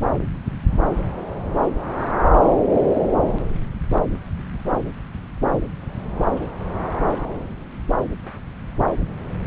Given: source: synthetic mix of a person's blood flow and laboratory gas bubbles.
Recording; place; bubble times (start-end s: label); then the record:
Doppler ultrasound of blood flow; subclavian vein
no bubbles
From the record:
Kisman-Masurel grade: 000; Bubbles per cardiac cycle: 0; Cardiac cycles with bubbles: 0%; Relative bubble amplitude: no bubbles discernible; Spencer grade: 0 (complete lack of bubble signals)